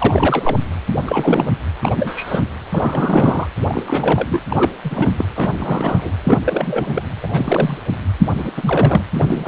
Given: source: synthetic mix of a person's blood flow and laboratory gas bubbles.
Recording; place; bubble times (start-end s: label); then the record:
Doppler ultrasound of blood flow; precordium
0.00-0.57 s: bubbles
1.06-1.50 s: bubbles
1.82-2.44 s: bubbles
2.72-3.47 s: bubbles
3.67-4.40 s: bubbles
4.49-4.71 s: bubbles
4.84-5.13 s: bubbles
5.17-5.25 s: bubbles
5.36-5.53 s: bubbles
5.58-6.13 s: bubbles
6.23-6.41 s: bubbles
6.46-7.03 s: bubbles
7.22-7.77 s: bubbles
8.19-8.27 s: bubbles
8.38-8.51 s: bubbles
8.56-9.03 s: bubbles
9.14-9.48 s: bubbles
From the record:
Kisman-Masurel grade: 343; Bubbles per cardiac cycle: rolling drumbeat, 9 or more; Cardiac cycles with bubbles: 100%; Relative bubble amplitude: loud (0.450 to 0.775); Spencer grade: 3 (all of the cardiac periods contain showers or single bubble signals, but not dominating or overriding the cardiac motion signals); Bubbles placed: anywhere in the cardiac cycle